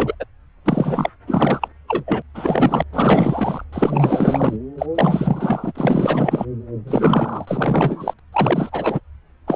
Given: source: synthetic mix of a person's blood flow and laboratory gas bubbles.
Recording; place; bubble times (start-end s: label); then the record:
Doppler ultrasound of blood flow; subclavian vein
0.00-0.15 s: bubbles
0.20-0.25 s: bubbles
0.65-1.10 s: bubbles
1.27-1.68 s: bubbles
1.88-2.22 s: bubbles
2.34-2.83 s: bubbles
2.92-3.64 s: bubbles
3.73-4.57 s: bubbles
4.78-4.86 s: bubbles
4.95-5.72 s: bubbles
5.75-6.46 s: bubbles
6.87-8.13 s: bubbles
8.32-9.00 s: bubbles
9.47-9.56 s: bubbles
From the record:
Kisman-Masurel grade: 444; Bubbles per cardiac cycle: continuous sound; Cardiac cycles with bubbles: 100%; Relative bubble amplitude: maximal (0.775 to 0.999); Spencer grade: 4 (maximum detectable bubble signal sounding continuously throughout systole and diastole of every cardiac period, and overriding the amplitude of the normal cardiac signals); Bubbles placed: anywhere in the cardiac cycle